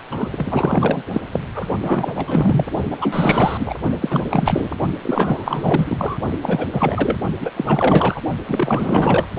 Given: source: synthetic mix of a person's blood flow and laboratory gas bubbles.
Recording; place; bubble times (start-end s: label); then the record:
Doppler ultrasound of blood flow; precordium
0.11-1.02 s: bubbles
1.11-1.21 s: bubbles
1.31-1.41 s: bubbles
1.54-1.67 s: bubbles
1.82-2.67 s: bubbles
2.91-3.75 s: bubbles
4.01-4.69 s: bubbles
5.01-6.17 s: bubbles
6.42-6.67 s: bubbles
6.72-7.17 s: bubbles
7.41-7.51 s: bubbles
7.56-8.21 s: bubbles
8.47-9.26 s: bubbles
From the record:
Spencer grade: 4 (maximum detectable bubble signal sounding continuously throughout systole and diastole of every cardiac period, and overriding the amplitude of the normal cardiac signals); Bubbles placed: only in the low amplitude regions of the cardiac cycle